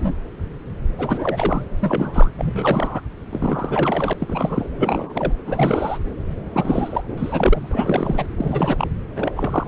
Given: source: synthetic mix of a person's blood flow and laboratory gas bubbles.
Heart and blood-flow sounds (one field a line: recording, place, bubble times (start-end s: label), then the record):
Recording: Doppler ultrasound of blood flow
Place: subclavian vein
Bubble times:
0.00-0.14 s: bubbles
0.98-1.62 s: bubbles
1.80-2.30 s: bubbles
2.38-3.00 s: bubbles
3.29-4.13 s: bubbles
4.19-4.66 s: bubbles
4.78-5.33 s: bubbles
5.45-5.98 s: bubbles
6.53-7.03 s: bubbles
7.07-8.27 s: bubbles
8.38-8.88 s: bubbles
9.16-9.31 s: bubbles
9.36-9.67 s: bubbles
From the record:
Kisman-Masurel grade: 332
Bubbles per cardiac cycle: rolling drumbeat, 9 or more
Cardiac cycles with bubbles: 50 to 99%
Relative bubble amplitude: moderate (0.250 to 0.450)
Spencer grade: 3 (all of the cardiac periods contain showers or single bubble signals, but not dominating or overriding the cardiac motion signals)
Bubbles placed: anywhere in the cardiac cycle